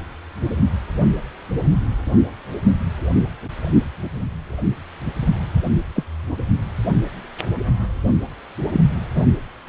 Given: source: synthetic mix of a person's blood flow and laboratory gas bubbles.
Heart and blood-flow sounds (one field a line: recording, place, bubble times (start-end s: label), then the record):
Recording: Doppler ultrasound of blood flow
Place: precordium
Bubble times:
5.96-6.04 s: bubbles
8.72-8.80 s: bubbles
9.15-9.23 s: bubbles
9.66-9.69 s: bubbles
From the record:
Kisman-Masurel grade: 123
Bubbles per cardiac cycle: 1 to 2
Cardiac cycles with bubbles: 10 to 50%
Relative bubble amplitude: loud (0.450 to 0.775)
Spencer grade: 2 (many but less than half of the cardiac periods contain bubble signals, singularly or in groups)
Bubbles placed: only in the low amplitude regions of the cardiac cycle